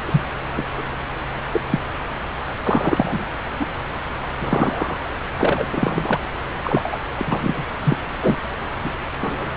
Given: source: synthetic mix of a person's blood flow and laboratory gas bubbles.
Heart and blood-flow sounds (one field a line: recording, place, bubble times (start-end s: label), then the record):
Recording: Doppler ultrasound of blood flow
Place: subclavian vein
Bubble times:
0.06-0.21 s: bubbles
0.56-0.65 s: bubbles
0.78-0.83 s: bubbles
1.21-1.23 s: bubbles
1.53-1.60 s: bubbles
1.71-1.79 s: bubbles
2.63-3.25 s: bubbles
3.59-3.67 s: bubbles
4.40-4.98 s: bubbles
5.37-5.68 s: bubbles
5.72-6.19 s: bubbles
6.64-6.98 s: bubbles
7.16-7.64 s: bubbles
7.83-7.97 s: bubbles
8.21-8.36 s: bubbles
8.84-8.92 s: bubbles
9.21-9.52 s: bubbles
From the record:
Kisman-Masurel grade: 243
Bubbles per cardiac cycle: several, 3 to 8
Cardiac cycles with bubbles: 100%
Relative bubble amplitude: loud (0.450 to 0.775)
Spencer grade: 3 (all of the cardiac periods contain showers or single bubble signals, but not dominating or overriding the cardiac motion signals)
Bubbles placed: anywhere in the cardiac cycle